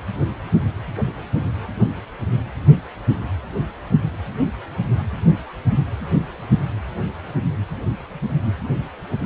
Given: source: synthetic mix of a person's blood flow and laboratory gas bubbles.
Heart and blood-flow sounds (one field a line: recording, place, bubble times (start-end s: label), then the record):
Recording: Doppler ultrasound of blood flow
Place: precordium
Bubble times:
no bubbles
From the record:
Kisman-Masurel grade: 000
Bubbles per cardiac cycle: 0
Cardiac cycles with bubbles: 0%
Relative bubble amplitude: no bubbles discernible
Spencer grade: 0 (complete lack of bubble signals)